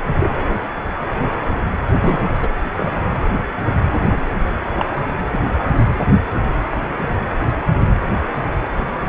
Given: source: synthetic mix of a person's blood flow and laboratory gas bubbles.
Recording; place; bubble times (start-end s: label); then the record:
Doppler ultrasound of blood flow; precordium
0.19-0.30 s: bubbles
2.01-2.26 s: bubbles
2.42-2.47 s: bubbles
2.76-2.98 s: bubbles
4.12-4.21 s: bubbles
4.79-4.86 s: bubbles
5.33-5.39 s: bubbles
From the record:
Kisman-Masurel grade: 122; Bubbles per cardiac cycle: 1 to 2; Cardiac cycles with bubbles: 10 to 50%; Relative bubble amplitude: moderate (0.250 to 0.450); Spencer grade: 2 (many but less than half of the cardiac periods contain bubble signals, singularly or in groups); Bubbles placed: anywhere in the cardiac cycle